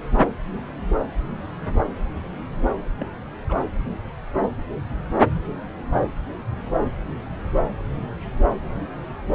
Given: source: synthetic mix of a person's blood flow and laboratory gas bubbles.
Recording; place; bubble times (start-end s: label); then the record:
Doppler ultrasound of blood flow; subclavian vein
2.99-3.08 s: bubbles
3.48-3.59 s: bubbles
3.64-3.71 s: bubbles
From the record:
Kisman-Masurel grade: 211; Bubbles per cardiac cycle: several, 3 to 8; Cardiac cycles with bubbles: 1 to 10%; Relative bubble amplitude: barely perceptible (0.100 to 0.250); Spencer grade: 1 (occasional bubble signal discernible with the cardiac motion signal, with majority of cardiac periods free of bubbles); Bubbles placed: anywhere in the cardiac cycle